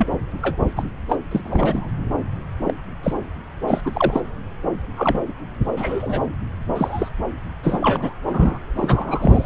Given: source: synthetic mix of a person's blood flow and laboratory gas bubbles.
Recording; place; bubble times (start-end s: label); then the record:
Doppler ultrasound of blood flow; subclavian vein
0.00-0.07 s: bubbles
0.41-0.56 s: bubbles
0.76-0.84 s: bubbles
1.08-1.17 s: bubbles
1.31-1.41 s: bubbles
1.44-1.91 s: bubbles
2.65-2.74 s: bubbles
3.02-3.14 s: bubbles
3.67-3.81 s: bubbles
3.84-4.21 s: bubbles
4.95-5.33 s: bubbles
5.76-6.22 s: bubbles
6.74-7.09 s: bubbles
7.63-8.14 s: bubbles
8.30-8.58 s: bubbles
8.75-9.45 s: bubbles
From the record:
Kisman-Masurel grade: 233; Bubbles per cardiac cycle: several, 3 to 8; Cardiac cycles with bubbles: 50 to 99%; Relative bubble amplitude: loud (0.450 to 0.775); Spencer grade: 3 (all of the cardiac periods contain showers or single bubble signals, but not dominating or overriding the cardiac motion signals); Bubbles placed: anywhere in the cardiac cycle